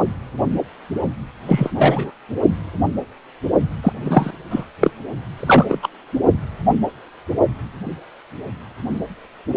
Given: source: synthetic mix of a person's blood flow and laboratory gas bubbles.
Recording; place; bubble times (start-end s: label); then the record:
Doppler ultrasound of blood flow; precordium
1.45-1.70 s: bubbles
1.76-2.11 s: bubbles
3.83-3.92 s: bubbles
4.03-4.32 s: bubbles
4.50-4.65 s: bubbles
4.81-4.91 s: bubbles
5.37-5.78 s: bubbles
5.82-5.88 s: bubbles
From the record:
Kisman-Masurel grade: 223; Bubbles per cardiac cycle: several, 3 to 8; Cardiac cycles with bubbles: 10 to 50%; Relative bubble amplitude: loud (0.450 to 0.775); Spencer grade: 2 (many but less than half of the cardiac periods contain bubble signals, singularly or in groups); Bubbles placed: only in the low amplitude regions of the cardiac cycle